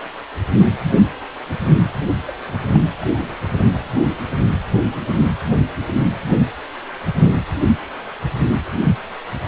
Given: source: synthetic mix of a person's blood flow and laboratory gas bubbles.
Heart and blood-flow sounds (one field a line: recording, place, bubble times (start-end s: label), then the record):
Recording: Doppler ultrasound of blood flow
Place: precordium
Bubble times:
2.27-2.32 s: bubbles
2.48-2.53 s: bubbles
2.65-2.77 s: bubbles
2.97-3.07 s: bubbles
3.19-3.65 s: bubbles
From the record:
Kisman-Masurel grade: 211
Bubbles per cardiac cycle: several, 3 to 8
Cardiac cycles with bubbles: 1 to 10%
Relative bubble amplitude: barely perceptible (0.100 to 0.250)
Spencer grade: 1 (occasional bubble signal discernible with the cardiac motion signal, with majority of cardiac periods free of bubbles)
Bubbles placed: anywhere in the cardiac cycle